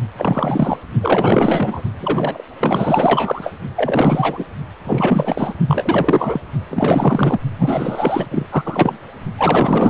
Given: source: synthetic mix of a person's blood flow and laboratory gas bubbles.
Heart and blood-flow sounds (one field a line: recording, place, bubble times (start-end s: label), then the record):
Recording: Doppler ultrasound of blood flow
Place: precordium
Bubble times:
0.17-0.77 s: bubbles
1.00-1.82 s: bubbles
1.99-2.45 s: bubbles
2.60-3.53 s: bubbles
3.76-4.46 s: bubbles
4.84-5.54 s: bubbles
5.67-6.40 s: bubbles
6.71-7.42 s: bubbles
7.58-8.27 s: bubbles
8.30-8.46 s: bubbles
8.50-8.97 s: bubbles
9.37-9.90 s: bubbles
From the record:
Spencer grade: 4 (maximum detectable bubble signal sounding continuously throughout systole and diastole of every cardiac period, and overriding the amplitude of the normal cardiac signals)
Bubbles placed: only in the low amplitude regions of the cardiac cycle